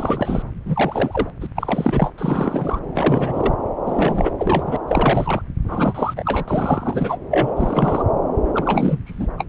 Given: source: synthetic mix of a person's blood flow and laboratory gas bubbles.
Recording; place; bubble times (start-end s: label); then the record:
Doppler ultrasound of blood flow; subclavian vein
0.00-0.43 s: bubbles
0.66-1.30 s: bubbles
1.41-1.47 s: bubbles
1.55-2.12 s: bubbles
2.17-2.80 s: bubbles
2.95-3.54 s: bubbles
3.86-4.33 s: bubbles
4.38-4.77 s: bubbles
4.88-5.42 s: bubbles
5.65-6.14 s: bubbles
6.17-6.44 s: bubbles
6.48-7.17 s: bubbles
7.31-8.03 s: bubbles
8.54-8.98 s: bubbles
9.06-9.27 s: bubbles
9.38-9.45 s: bubbles
From the record:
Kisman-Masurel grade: 342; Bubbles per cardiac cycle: rolling drumbeat, 9 or more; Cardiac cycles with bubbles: 100%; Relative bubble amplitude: moderate (0.250 to 0.450); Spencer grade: 3 (all of the cardiac periods contain showers or single bubble signals, but not dominating or overriding the cardiac motion signals); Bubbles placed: anywhere in the cardiac cycle